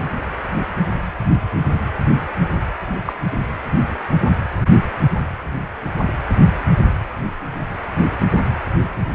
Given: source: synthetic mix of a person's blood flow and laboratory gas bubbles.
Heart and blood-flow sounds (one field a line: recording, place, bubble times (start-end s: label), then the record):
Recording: Doppler ultrasound of blood flow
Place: precordium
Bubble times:
3.05-3.13 s: bubbles
From the record:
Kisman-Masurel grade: 112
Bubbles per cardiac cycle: 1 to 2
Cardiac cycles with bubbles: 1 to 10%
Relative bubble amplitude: moderate (0.250 to 0.450)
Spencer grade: 1 (occasional bubble signal discernible with the cardiac motion signal, with majority of cardiac periods free of bubbles)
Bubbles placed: anywhere in the cardiac cycle